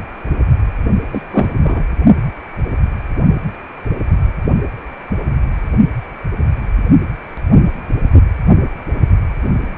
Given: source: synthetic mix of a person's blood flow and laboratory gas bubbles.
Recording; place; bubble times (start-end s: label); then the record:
Doppler ultrasound of blood flow; precordium
1.12-1.21 s: bubbles
1.31-1.83 s: bubbles
From the record:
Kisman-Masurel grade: 212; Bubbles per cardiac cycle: several, 3 to 8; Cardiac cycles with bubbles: 1 to 10%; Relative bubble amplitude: moderate (0.250 to 0.450); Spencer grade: 1 (occasional bubble signal discernible with the cardiac motion signal, with majority of cardiac periods free of bubbles); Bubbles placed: only in the low amplitude regions of the cardiac cycle